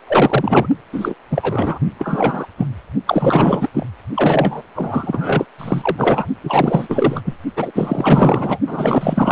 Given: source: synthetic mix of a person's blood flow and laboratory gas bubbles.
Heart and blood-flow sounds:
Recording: Doppler ultrasound of blood flow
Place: precordium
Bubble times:
0.07-0.68 s: bubbles
0.93-1.15 s: bubbles
1.30-1.79 s: bubbles
1.98-2.48 s: bubbles
2.57-2.67 s: bubbles
3.06-3.69 s: bubbles
3.73-3.86 s: bubbles
4.15-4.62 s: bubbles
4.76-5.46 s: bubbles
5.58-6.27 s: bubbles
6.44-7.22 s: bubbles
7.25-7.36 s: bubbles
7.56-7.72 s: bubbles
7.75-8.59 s: bubbles
8.66-9.32 s: bubbles
From the record:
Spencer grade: 4 (maximum detectable bubble signal sounding continuously throughout systole and diastole of every cardiac period, and overriding the amplitude of the normal cardiac signals)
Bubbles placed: only in the low amplitude regions of the cardiac cycle

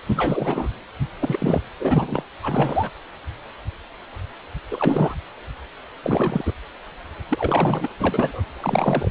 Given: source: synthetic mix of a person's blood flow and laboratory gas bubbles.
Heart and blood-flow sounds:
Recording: Doppler ultrasound of blood flow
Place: precordium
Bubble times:
0.06-0.68 s: bubbles
1.20-1.61 s: bubbles
1.80-2.22 s: bubbles
2.42-2.91 s: bubbles
4.71-5.14 s: bubbles
6.02-6.51 s: bubbles
7.29-7.89 s: bubbles
7.99-8.42 s: bubbles
8.54-9.10 s: bubbles
From the record:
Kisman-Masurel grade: 332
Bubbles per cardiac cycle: rolling drumbeat, 9 or more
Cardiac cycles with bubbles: 50 to 99%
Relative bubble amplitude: moderate (0.250 to 0.450)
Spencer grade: 3 (all of the cardiac periods contain showers or single bubble signals, but not dominating or overriding the cardiac motion signals)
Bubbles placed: anywhere in the cardiac cycle

